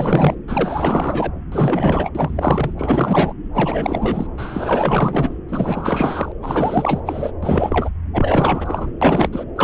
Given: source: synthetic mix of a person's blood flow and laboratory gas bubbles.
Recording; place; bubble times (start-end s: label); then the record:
Doppler ultrasound of blood flow; subclavian vein
0.00-0.34 s: bubbles
0.47-1.33 s: bubbles
1.52-2.10 s: bubbles
2.15-2.73 s: bubbles
2.77-3.33 s: bubbles
3.53-4.27 s: bubbles
4.38-5.36 s: bubbles
5.48-6.32 s: bubbles
6.42-7.00 s: bubbles
7.05-7.32 s: bubbles
7.42-7.90 s: bubbles
8.13-8.92 s: bubbles
9.01-9.44 s: bubbles
9.55-9.64 s: bubbles
From the record:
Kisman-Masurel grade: 444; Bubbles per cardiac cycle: continuous sound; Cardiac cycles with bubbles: 100%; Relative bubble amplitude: maximal (0.775 to 0.999); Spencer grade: 4 (maximum detectable bubble signal sounding continuously throughout systole and diastole of every cardiac period, and overriding the amplitude of the normal cardiac signals); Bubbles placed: anywhere in the cardiac cycle